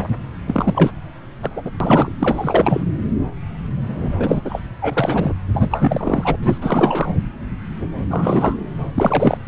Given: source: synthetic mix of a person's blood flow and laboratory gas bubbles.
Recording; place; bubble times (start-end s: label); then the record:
Doppler ultrasound of blood flow; subclavian vein
0.00-0.10 s: bubbles
0.47-0.90 s: bubbles
1.42-1.50 s: bubbles
1.56-1.62 s: bubbles
1.65-1.71 s: bubbles
1.80-2.10 s: bubbles
2.19-2.84 s: bubbles
3.83-4.61 s: bubbles
4.81-5.33 s: bubbles
5.54-6.36 s: bubbles
6.39-6.58 s: bubbles
6.61-7.12 s: bubbles
8.06-8.55 s: bubbles
8.95-9.42 s: bubbles
From the record:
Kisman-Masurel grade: 333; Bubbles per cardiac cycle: rolling drumbeat, 9 or more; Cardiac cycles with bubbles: 50 to 99%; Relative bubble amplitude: loud (0.450 to 0.775); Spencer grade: 3 (all of the cardiac periods contain showers or single bubble signals, but not dominating or overriding the cardiac motion signals); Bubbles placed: anywhere in the cardiac cycle